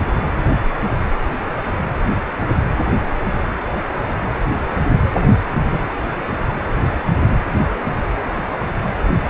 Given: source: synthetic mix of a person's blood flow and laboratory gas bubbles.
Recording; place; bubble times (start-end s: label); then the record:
Doppler ultrasound of blood flow; precordium
1.65-1.72 s: bubbles
5.15-5.35 s: bubbles
5.71-5.84 s: bubbles
From the record:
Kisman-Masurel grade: 122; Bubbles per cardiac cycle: 1 to 2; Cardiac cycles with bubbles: 10 to 50%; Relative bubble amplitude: moderate (0.250 to 0.450); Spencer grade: 2 (many but less than half of the cardiac periods contain bubble signals, singularly or in groups); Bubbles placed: anywhere in the cardiac cycle